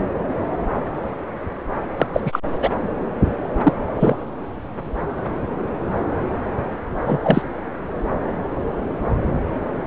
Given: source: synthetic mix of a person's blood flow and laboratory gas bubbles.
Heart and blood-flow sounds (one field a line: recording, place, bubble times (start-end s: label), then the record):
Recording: Doppler ultrasound of blood flow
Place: subclavian vein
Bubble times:
1.97-2.07 s: bubbles
2.13-2.21 s: bubbles
2.25-2.40 s: bubbles
2.59-2.74 s: bubbles
3.63-3.73 s: bubbles
3.99-4.16 s: bubbles
7.04-7.19 s: bubbles
7.23-7.42 s: bubbles
From the record:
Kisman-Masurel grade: 223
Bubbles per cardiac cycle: several, 3 to 8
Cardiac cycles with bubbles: 10 to 50%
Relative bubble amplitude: loud (0.450 to 0.775)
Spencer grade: 2 (many but less than half of the cardiac periods contain bubble signals, singularly or in groups)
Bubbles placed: anywhere in the cardiac cycle